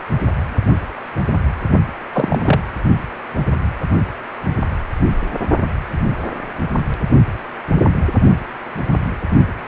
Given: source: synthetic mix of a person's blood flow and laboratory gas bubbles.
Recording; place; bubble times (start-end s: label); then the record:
Doppler ultrasound of blood flow; precordium
2.12-2.42 s: bubbles
2.45-2.60 s: bubbles
From the record:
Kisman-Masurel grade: 223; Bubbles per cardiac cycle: several, 3 to 8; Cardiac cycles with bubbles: 10 to 50%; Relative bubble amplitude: loud (0.450 to 0.775); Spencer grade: 2 (many but less than half of the cardiac periods contain bubble signals, singularly or in groups); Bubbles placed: only in the low amplitude regions of the cardiac cycle